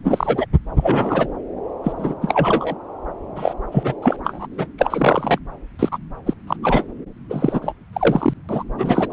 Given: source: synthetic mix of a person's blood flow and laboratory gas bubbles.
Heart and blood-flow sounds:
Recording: Doppler ultrasound of blood flow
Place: subclavian vein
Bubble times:
0.04-0.45 s: bubbles
0.77-1.27 s: bubbles
1.83-1.92 s: bubbles
1.98-2.15 s: bubbles
2.21-2.74 s: bubbles
3.35-3.53 s: bubbles
3.72-3.94 s: bubbles
4.02-4.17 s: bubbles
4.24-4.47 s: bubbles
4.51-4.67 s: bubbles
4.78-5.39 s: bubbles
5.79-5.89 s: bubbles
5.92-5.98 s: bubbles
6.26-6.33 s: bubbles
6.47-6.57 s: bubbles
6.62-6.85 s: bubbles
7.29-7.73 s: bubbles
7.93-8.33 s: bubbles
8.48-8.63 s: bubbles
8.78-9.07 s: bubbles
9.09-9.12 s: bubbles
From the record:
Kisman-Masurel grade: 243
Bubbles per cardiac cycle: several, 3 to 8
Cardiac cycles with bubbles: 100%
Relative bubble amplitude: loud (0.450 to 0.775)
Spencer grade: 3 (all of the cardiac periods contain showers or single bubble signals, but not dominating or overriding the cardiac motion signals)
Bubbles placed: anywhere in the cardiac cycle

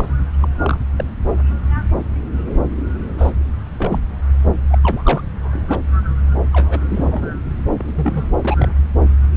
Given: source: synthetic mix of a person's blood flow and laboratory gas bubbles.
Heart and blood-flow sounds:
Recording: Doppler ultrasound of blood flow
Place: subclavian vein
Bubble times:
0.00-0.08 s: bubbles
0.42-0.48 s: bubbles
0.62-0.78 s: bubbles
0.97-1.04 s: bubbles
3.17-3.30 s: bubbles
3.77-4.00 s: bubbles
4.71-4.79 s: bubbles
4.83-5.24 s: bubbles
5.41-5.78 s: bubbles
6.52-6.81 s: bubbles
6.89-7.05 s: bubbles
7.10-7.35 s: bubbles
7.77-8.23 s: bubbles
8.44-8.68 s: bubbles
From the record:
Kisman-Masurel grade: 232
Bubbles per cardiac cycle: several, 3 to 8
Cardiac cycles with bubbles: 50 to 99%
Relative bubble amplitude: moderate (0.250 to 0.450)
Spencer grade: 3 (all of the cardiac periods contain showers or single bubble signals, but not dominating or overriding the cardiac motion signals)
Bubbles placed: anywhere in the cardiac cycle

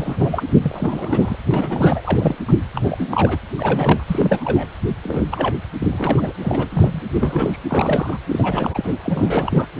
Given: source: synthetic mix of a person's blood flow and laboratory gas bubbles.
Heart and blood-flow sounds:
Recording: Doppler ultrasound of blood flow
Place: precordium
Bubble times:
0.00-0.43 s: bubbles
0.62-1.36 s: bubbles
1.44-2.01 s: bubbles
2.04-2.35 s: bubbles
2.48-2.57 s: bubbles
2.73-3.39 s: bubbles
3.57-4.67 s: bubbles
5.04-5.25 s: bubbles
5.31-5.56 s: bubbles
5.80-5.87 s: bubbles
5.92-6.33 s: bubbles
6.42-7.03 s: bubbles
7.13-7.58 s: bubbles
7.68-8.17 s: bubbles
8.29-8.94 s: bubbles
9.04-9.66 s: bubbles
9.77-9.80 s: bubbles
From the record:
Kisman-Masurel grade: 342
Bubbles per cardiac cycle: rolling drumbeat, 9 or more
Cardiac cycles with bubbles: 100%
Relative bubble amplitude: moderate (0.250 to 0.450)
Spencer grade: 3 (all of the cardiac periods contain showers or single bubble signals, but not dominating or overriding the cardiac motion signals)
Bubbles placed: anywhere in the cardiac cycle

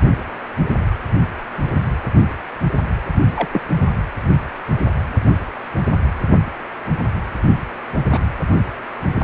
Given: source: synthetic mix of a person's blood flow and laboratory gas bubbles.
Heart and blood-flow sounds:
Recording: Doppler ultrasound of blood flow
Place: precordium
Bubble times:
3.35-3.49 s: bubbles
3.52-3.62 s: bubbles
8.12-8.19 s: bubbles
From the record:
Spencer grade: 2 (many but less than half of the cardiac periods contain bubble signals, singularly or in groups)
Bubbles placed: anywhere in the cardiac cycle

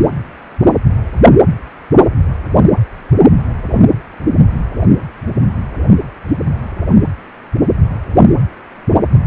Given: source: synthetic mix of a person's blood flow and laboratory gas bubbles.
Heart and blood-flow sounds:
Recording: Doppler ultrasound of blood flow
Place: precordium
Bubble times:
no bubbles
From the record:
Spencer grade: 0 (complete lack of bubble signals)

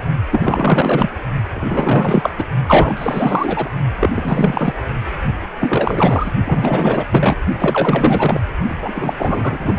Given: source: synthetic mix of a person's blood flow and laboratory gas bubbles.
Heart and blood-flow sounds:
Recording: Doppler ultrasound of blood flow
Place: precordium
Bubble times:
0.31-1.10 s: bubbles
1.55-2.44 s: bubbles
2.68-3.70 s: bubbles
4.00-4.09 s: bubbles
4.12-4.74 s: bubbles
5.59-6.32 s: bubbles
6.45-7.04 s: bubbles
7.12-7.36 s: bubbles
7.58-8.40 s: bubbles
8.68-9.13 s: bubbles
9.17-9.78 s: bubbles
From the record:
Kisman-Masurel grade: 444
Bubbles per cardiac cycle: continuous sound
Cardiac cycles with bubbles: 100%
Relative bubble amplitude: maximal (0.775 to 0.999)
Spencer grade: 4 (maximum detectable bubble signal sounding continuously throughout systole and diastole of every cardiac period, and overriding the amplitude of the normal cardiac signals)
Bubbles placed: only in the low amplitude regions of the cardiac cycle

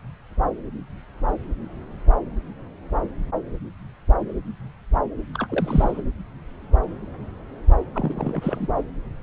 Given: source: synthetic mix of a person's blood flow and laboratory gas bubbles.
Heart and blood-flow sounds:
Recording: Doppler ultrasound of blood flow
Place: subclavian vein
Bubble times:
5.34-6.02 s: bubbles
7.94-8.67 s: bubbles
From the record:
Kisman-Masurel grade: 222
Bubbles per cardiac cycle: several, 3 to 8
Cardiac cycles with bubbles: 10 to 50%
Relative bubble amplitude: moderate (0.250 to 0.450)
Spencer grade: 2 (many but less than half of the cardiac periods contain bubble signals, singularly or in groups)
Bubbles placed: anywhere in the cardiac cycle

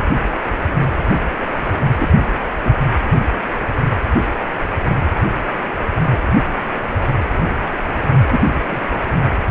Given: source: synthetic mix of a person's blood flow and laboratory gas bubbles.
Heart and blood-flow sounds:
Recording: Doppler ultrasound of blood flow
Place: precordium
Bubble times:
1.98-2.08 s: bubbles
2.65-2.71 s: bubbles
6.06-6.18 s: bubbles
8.30-8.40 s: bubbles
8.46-8.82 s: bubbles
From the record:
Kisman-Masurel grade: 122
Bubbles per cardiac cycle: 1 to 2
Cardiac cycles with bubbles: 10 to 50%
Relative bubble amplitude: moderate (0.250 to 0.450)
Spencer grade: 2 (many but less than half of the cardiac periods contain bubble signals, singularly or in groups)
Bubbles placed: anywhere in the cardiac cycle

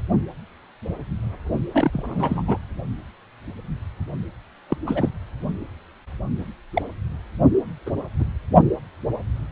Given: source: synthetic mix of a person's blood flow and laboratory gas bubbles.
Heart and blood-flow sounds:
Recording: Doppler ultrasound of blood flow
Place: precordium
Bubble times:
1.74-1.91 s: bubbles
1.93-2.57 s: bubbles
4.69-4.77 s: bubbles
4.86-5.09 s: bubbles
6.73-6.82 s: bubbles
7.86-7.90 s: bubbles
8.19-8.25 s: bubbles
From the record:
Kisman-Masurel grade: 222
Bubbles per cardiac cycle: several, 3 to 8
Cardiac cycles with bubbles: 10 to 50%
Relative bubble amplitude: moderate (0.250 to 0.450)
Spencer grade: 2 (many but less than half of the cardiac periods contain bubble signals, singularly or in groups)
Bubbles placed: only in the low amplitude regions of the cardiac cycle

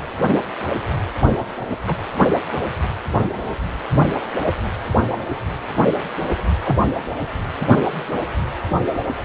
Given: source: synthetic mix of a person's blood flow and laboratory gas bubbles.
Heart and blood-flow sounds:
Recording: Doppler ultrasound of blood flow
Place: precordium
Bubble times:
1.86-1.97 s: bubbles
6.64-6.76 s: bubbles
From the record:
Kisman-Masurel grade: 122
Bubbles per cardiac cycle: 1 to 2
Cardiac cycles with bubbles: 10 to 50%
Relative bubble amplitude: moderate (0.250 to 0.450)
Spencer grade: 2 (many but less than half of the cardiac periods contain bubble signals, singularly or in groups)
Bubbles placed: anywhere in the cardiac cycle

